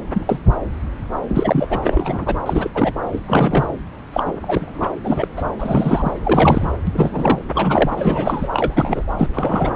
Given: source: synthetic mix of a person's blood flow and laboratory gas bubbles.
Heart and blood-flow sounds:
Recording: Doppler ultrasound of blood flow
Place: subclavian vein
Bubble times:
0.13-0.39 s: bubbles
1.28-1.68 s: bubbles
1.70-1.80 s: bubbles
1.84-2.35 s: bubbles
2.46-2.71 s: bubbles
2.75-2.92 s: bubbles
3.11-3.21 s: bubbles
3.26-3.67 s: bubbles
4.12-4.24 s: bubbles
4.26-4.32 s: bubbles
4.42-4.90 s: bubbles
5.04-5.28 s: bubbles
5.36-5.43 s: bubbles
5.60-6.12 s: bubbles
6.23-6.73 s: bubbles
6.87-7.39 s: bubbles
7.55-7.90 s: bubbles
7.97-8.49 s: bubbles
8.52-9.04 s: bubbles
9.18-9.29 s: bubbles
9.33-9.71 s: bubbles
From the record:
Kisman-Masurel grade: 233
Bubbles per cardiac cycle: several, 3 to 8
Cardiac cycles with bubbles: 50 to 99%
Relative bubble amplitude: loud (0.450 to 0.775)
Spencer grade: 3 (all of the cardiac periods contain showers or single bubble signals, but not dominating or overriding the cardiac motion signals)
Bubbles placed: anywhere in the cardiac cycle

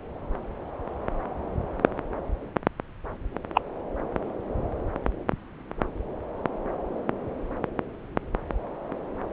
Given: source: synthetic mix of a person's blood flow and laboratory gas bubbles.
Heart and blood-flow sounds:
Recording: Doppler ultrasound of blood flow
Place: subclavian vein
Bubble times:
3.54-3.62 s: bubbles
From the record:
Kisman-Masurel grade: 123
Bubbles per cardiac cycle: 1 to 2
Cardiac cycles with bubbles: 10 to 50%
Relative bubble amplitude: loud (0.450 to 0.775)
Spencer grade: 2 (many but less than half of the cardiac periods contain bubble signals, singularly or in groups)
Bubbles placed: anywhere in the cardiac cycle

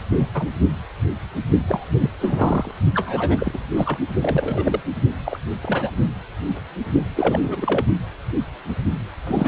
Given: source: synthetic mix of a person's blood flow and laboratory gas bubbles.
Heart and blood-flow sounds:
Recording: Doppler ultrasound of blood flow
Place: precordium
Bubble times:
0.09-0.28 s: bubbles
0.34-0.46 s: bubbles
1.68-1.84 s: bubbles
1.99-2.11 s: bubbles
2.21-2.71 s: bubbles
2.94-3.58 s: bubbles
3.76-3.98 s: bubbles
4.21-4.81 s: bubbles
5.25-5.39 s: bubbles
5.63-5.90 s: bubbles
7.15-7.84 s: bubbles
9.27-9.47 s: bubbles
From the record:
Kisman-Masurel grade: 232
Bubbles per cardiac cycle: several, 3 to 8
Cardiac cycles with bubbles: 50 to 99%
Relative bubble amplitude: moderate (0.250 to 0.450)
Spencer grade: 3 (all of the cardiac periods contain showers or single bubble signals, but not dominating or overriding the cardiac motion signals)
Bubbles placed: only in the low amplitude regions of the cardiac cycle

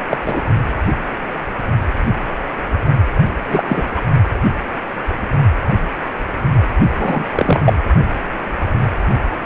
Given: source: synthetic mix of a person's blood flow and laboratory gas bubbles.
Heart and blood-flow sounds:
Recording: Doppler ultrasound of blood flow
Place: precordium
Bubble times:
0.09-0.17 s: bubbles
0.26-0.41 s: bubbles
3.49-3.90 s: bubbles
3.96-4.01 s: bubbles
6.98-7.24 s: bubbles
7.35-7.61 s: bubbles
7.65-7.73 s: bubbles
From the record:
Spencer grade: 2 (many but less than half of the cardiac periods contain bubble signals, singularly or in groups)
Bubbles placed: only in the low amplitude regions of the cardiac cycle

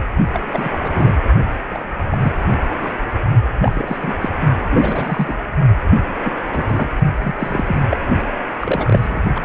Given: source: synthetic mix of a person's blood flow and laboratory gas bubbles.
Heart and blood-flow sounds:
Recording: Doppler ultrasound of blood flow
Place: precordium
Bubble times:
0.33-0.40 s: bubbles
0.53-0.69 s: bubbles
0.79-1.13 s: bubbles
1.70-1.83 s: bubbles
2.11-2.18 s: bubbles
2.22-2.33 s: bubbles
2.81-2.93 s: bubbles
3.58-3.97 s: bubbles
3.99-4.15 s: bubbles
4.21-4.29 s: bubbles
4.70-5.36 s: bubbles
6.24-6.31 s: bubbles
6.51-6.88 s: bubbles
7.23-7.33 s: bubbles
7.39-7.76 s: bubbles
7.90-7.97 s: bubbles
8.61-9.24 s: bubbles
9.35-9.40 s: bubbles
From the record:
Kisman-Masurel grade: 242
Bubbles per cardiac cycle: several, 3 to 8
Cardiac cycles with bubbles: 100%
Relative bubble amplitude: moderate (0.250 to 0.450)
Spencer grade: 3 (all of the cardiac periods contain showers or single bubble signals, but not dominating or overriding the cardiac motion signals)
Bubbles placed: only in the low amplitude regions of the cardiac cycle

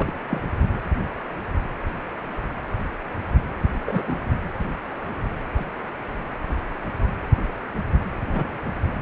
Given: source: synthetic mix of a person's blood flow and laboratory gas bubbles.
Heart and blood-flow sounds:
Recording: Doppler ultrasound of blood flow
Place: precordium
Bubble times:
0.00-0.12 s: bubbles
0.30-0.41 s: bubbles
3.86-4.16 s: bubbles
5.57-5.65 s: bubbles
8.27-8.57 s: bubbles
From the record:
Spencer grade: 2 (many but less than half of the cardiac periods contain bubble signals, singularly or in groups)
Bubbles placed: anywhere in the cardiac cycle

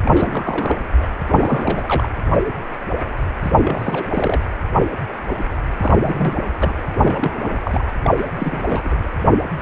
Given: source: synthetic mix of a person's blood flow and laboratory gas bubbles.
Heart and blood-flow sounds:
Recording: Doppler ultrasound of blood flow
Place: precordium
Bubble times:
0.05-0.76 s: bubbles
0.98-1.06 s: bubbles
1.27-2.08 s: bubbles
3.42-3.53 s: bubbles
3.57-4.41 s: bubbles
5.80-6.42 s: bubbles
6.59-6.73 s: bubbles
7.00-7.60 s: bubbles
7.64-7.84 s: bubbles
8.03-8.11 s: bubbles
8.17-8.25 s: bubbles
8.36-8.96 s: bubbles
From the record:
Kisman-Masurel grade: 332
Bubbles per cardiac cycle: rolling drumbeat, 9 or more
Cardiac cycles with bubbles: 50 to 99%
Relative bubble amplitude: moderate (0.250 to 0.450)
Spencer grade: 3 (all of the cardiac periods contain showers or single bubble signals, but not dominating or overriding the cardiac motion signals)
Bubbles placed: anywhere in the cardiac cycle

